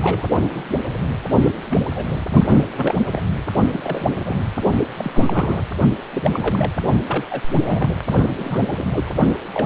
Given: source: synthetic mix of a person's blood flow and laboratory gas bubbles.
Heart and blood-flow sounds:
Doppler ultrasound of blood flow; precordium
0.00-0.25 s: bubbles
0.41-0.64 s: bubbles
1.41-1.51 s: bubbles
1.70-1.79 s: bubbles
1.94-2.06 s: bubbles
2.43-2.61 s: bubbles
2.75-2.95 s: bubbles
3.12-3.21 s: bubbles
3.73-3.81 s: bubbles
3.83-4.37 s: bubbles
4.97-5.65 s: bubbles
6.13-6.71 s: bubbles
7.07-7.47 s: bubbles
7.64-7.90 s: bubbles
8.16-8.26 s: bubbles
8.37-8.67 s: bubbles
8.71-9.04 s: bubbles
9.54-9.66 s: bubbles
From the record:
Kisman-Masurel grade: 242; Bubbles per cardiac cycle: several, 3 to 8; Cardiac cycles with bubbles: 100%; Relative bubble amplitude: moderate (0.250 to 0.450); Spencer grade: 3 (all of the cardiac periods contain showers or single bubble signals, but not dominating or overriding the cardiac motion signals); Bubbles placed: only in the low amplitude regions of the cardiac cycle

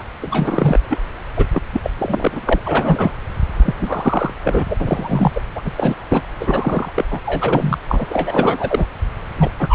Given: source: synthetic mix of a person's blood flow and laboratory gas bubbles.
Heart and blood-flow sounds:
Doppler ultrasound of blood flow; subclavian vein
0.00-0.02 s: bubbles
0.21-0.79 s: bubbles
0.90-0.99 s: bubbles
1.36-1.46 s: bubbles
1.52-1.62 s: bubbles
1.73-1.80 s: bubbles
1.83-1.91 s: bubbles
1.98-2.59 s: bubbles
2.65-3.12 s: bubbles
3.57-3.73 s: bubbles
3.75-4.33 s: bubbles
4.43-4.66 s: bubbles
4.68-4.76 s: bubbles
4.79-5.31 s: bubbles
5.35-5.41 s: bubbles
5.55-5.72 s: bubbles
5.78-5.95 s: bubbles
6.09-6.22 s: bubbles
6.41-6.92 s: bubbles
6.96-7.04 s: bubbles
7.10-7.20 s: bubbles
7.25-7.78 s: bubbles
7.88-8.05 s: bubbles
8.10-8.86 s: bubbles
9.37-9.51 s: bubbles
9.59-9.75 s: bubbles
From the record:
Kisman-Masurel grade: 343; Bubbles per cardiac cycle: rolling drumbeat, 9 or more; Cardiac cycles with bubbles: 100%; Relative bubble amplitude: loud (0.450 to 0.775); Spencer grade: 3 (all of the cardiac periods contain showers or single bubble signals, but not dominating or overriding the cardiac motion signals); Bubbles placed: anywhere in the cardiac cycle

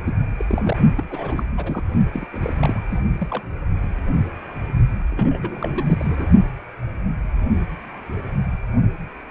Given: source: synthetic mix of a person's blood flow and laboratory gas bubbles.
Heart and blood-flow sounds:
Doppler ultrasound of blood flow; precordium
0.04-0.16 s: bubbles
0.38-0.77 s: bubbles
0.95-1.04 s: bubbles
1.10-1.43 s: bubbles
1.56-1.83 s: bubbles
2.12-2.27 s: bubbles
2.33-2.53 s: bubbles
2.60-2.80 s: bubbles
2.91-3.01 s: bubbles
3.18-3.43 s: bubbles
5.10-6.25 s: bubbles
From the record:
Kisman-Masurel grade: 221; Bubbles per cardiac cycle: several, 3 to 8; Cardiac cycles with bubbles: 10 to 50%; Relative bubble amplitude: barely perceptible (0.100 to 0.250); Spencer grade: 2 (many but less than half of the cardiac periods contain bubble signals, singularly or in groups); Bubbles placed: only in the low amplitude regions of the cardiac cycle

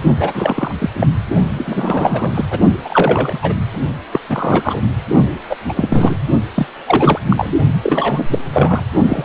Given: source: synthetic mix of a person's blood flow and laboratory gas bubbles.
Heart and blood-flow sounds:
Doppler ultrasound of blood flow; precordium
0.20-0.73 s: bubbles
0.79-0.90 s: bubbles
0.94-1.07 s: bubbles
1.54-2.46 s: bubbles
2.50-2.60 s: bubbles
2.84-3.39 s: bubbles
3.42-3.54 s: bubbles
4.12-4.20 s: bubbles
4.29-4.81 s: bubbles
5.49-5.57 s: bubbles
5.68-5.73 s: bubbles
5.77-6.15 s: bubbles
6.54-6.66 s: bubbles
6.87-7.19 s: bubbles
7.29-7.52 s: bubbles
7.83-8.38 s: bubbles
8.53-8.83 s: bubbles
9.08-9.25 s: bubbles
From the record:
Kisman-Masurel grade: 333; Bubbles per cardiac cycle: rolling drumbeat, 9 or more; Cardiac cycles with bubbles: 50 to 99%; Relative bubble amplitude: loud (0.450 to 0.775); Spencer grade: 3 (all of the cardiac periods contain showers or single bubble signals, but not dominating or overriding the cardiac motion signals); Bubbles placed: only in the low amplitude regions of the cardiac cycle

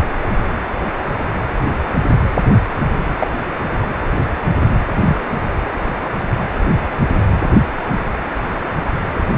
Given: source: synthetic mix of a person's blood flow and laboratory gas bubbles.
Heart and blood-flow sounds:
Doppler ultrasound of blood flow; precordium
3.19-3.27 s: bubbles
5.05-5.17 s: bubbles
From the record:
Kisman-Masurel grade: 122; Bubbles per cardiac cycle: 1 to 2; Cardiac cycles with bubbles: 10 to 50%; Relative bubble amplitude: moderate (0.250 to 0.450); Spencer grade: 2 (many but less than half of the cardiac periods contain bubble signals, singularly or in groups); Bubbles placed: anywhere in the cardiac cycle

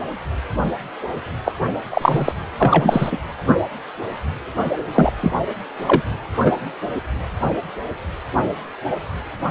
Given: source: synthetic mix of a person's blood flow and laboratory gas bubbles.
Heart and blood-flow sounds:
Doppler ultrasound of blood flow; precordium
1.45-1.52 s: bubbles
1.91-2.32 s: bubbles
2.58-3.18 s: bubbles
4.95-5.12 s: bubbles
5.21-5.31 s: bubbles
5.87-6.02 s: bubbles
6.42-6.53 s: bubbles
From the record:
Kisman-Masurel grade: 223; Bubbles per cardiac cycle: several, 3 to 8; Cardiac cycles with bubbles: 10 to 50%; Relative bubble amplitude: loud (0.450 to 0.775); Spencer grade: 2 (many but less than half of the cardiac periods contain bubble signals, singularly or in groups); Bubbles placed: anywhere in the cardiac cycle

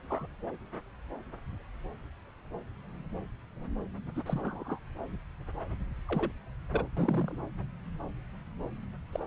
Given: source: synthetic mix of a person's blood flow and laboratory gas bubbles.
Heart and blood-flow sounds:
Doppler ultrasound of blood flow; subclavian vein
0.10-0.27 s: bubbles
4.16-4.22 s: bubbles
4.26-4.79 s: bubbles
6.09-6.31 s: bubbles
6.71-6.87 s: bubbles
6.96-7.37 s: bubbles
9.12-9.24 s: bubbles
From the record:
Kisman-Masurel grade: 221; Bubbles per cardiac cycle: several, 3 to 8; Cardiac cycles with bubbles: 10 to 50%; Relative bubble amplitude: barely perceptible (0.100 to 0.250); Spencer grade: 2 (many but less than half of the cardiac periods contain bubble signals, singularly or in groups); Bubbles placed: anywhere in the cardiac cycle

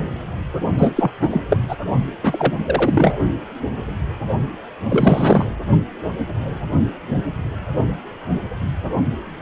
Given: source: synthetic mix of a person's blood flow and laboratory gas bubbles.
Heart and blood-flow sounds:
Doppler ultrasound of blood flow; precordium
0.78-1.11 s: bubbles
1.21-1.41 s: bubbles
1.49-1.58 s: bubbles
1.69-1.76 s: bubbles
2.23-2.54 s: bubbles
2.66-3.17 s: bubbles
4.89-5.46 s: bubbles
From the record:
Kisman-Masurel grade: 223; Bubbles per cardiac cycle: several, 3 to 8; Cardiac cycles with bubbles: 10 to 50%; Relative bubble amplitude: loud (0.450 to 0.775); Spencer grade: 2 (many but less than half of the cardiac periods contain bubble signals, singularly or in groups); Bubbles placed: only in the low amplitude regions of the cardiac cycle

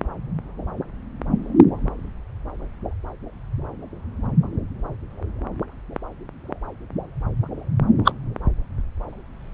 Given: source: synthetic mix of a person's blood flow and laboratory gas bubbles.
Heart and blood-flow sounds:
Doppler ultrasound of blood flow; subclavian vein
8.04-8.12 s: bubbles
From the record:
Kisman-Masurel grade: 113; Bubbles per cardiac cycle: 1 to 2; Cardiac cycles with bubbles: 1 to 10%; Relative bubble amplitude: loud (0.450 to 0.775); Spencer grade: 1 (occasional bubble signal discernible with the cardiac motion signal, with majority of cardiac periods free of bubbles); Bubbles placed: anywhere in the cardiac cycle

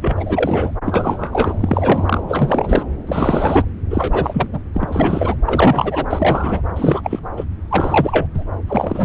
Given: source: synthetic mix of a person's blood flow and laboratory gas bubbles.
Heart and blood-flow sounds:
Doppler ultrasound of blood flow; subclavian vein
0.01-0.76 s: bubbles
0.85-2.21 s: bubbles
2.28-2.83 s: bubbles
3.06-3.65 s: bubbles
3.90-4.47 s: bubbles
4.53-4.59 s: bubbles
4.74-5.37 s: bubbles
5.45-6.05 s: bubbles
6.08-6.62 s: bubbles
6.76-7.20 s: bubbles
7.37-7.45 s: bubbles
7.71-8.26 s: bubbles
8.34-8.44 s: bubbles
8.67-9.05 s: bubbles
From the record:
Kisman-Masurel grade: 343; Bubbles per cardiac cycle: rolling drumbeat, 9 or more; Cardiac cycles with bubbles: 100%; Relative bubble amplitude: loud (0.450 to 0.775); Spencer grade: 3 (all of the cardiac periods contain showers or single bubble signals, but not dominating or overriding the cardiac motion signals); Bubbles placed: anywhere in the cardiac cycle

